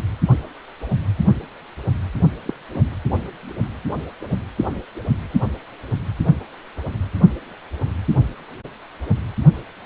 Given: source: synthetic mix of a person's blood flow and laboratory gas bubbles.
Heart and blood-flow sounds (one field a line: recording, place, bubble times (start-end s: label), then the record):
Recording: Doppler ultrasound of blood flow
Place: precordium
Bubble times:
2.46-2.54 s: bubbles
2.74-2.81 s: bubbles
From the record:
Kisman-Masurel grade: 211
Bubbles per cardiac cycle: several, 3 to 8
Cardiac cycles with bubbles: 1 to 10%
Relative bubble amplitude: barely perceptible (0.100 to 0.250)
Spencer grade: 1 (occasional bubble signal discernible with the cardiac motion signal, with majority of cardiac periods free of bubbles)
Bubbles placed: anywhere in the cardiac cycle